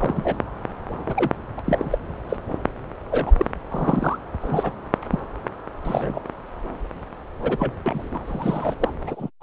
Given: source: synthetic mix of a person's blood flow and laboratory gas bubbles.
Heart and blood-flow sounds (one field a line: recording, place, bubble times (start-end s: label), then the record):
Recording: Doppler ultrasound of blood flow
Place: subclavian vein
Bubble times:
0.00-0.36 s: bubbles
1.01-1.30 s: bubbles
1.57-1.61 s: bubbles
1.65-1.98 s: bubbles
2.29-2.37 s: bubbles
3.11-3.32 s: bubbles
3.36-3.45 s: bubbles
3.71-4.17 s: bubbles
4.41-4.72 s: bubbles
5.10-5.20 s: bubbles
5.83-6.20 s: bubbles
7.43-7.78 s: bubbles
7.86-8.19 s: bubbles
8.27-8.75 s: bubbles
8.79-8.93 s: bubbles
9.06-9.29 s: bubbles
9.40-9.43 s: bubbles
From the record:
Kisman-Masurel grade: 242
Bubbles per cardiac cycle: several, 3 to 8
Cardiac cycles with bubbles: 100%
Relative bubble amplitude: moderate (0.250 to 0.450)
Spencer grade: 3 (all of the cardiac periods contain showers or single bubble signals, but not dominating or overriding the cardiac motion signals)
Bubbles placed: anywhere in the cardiac cycle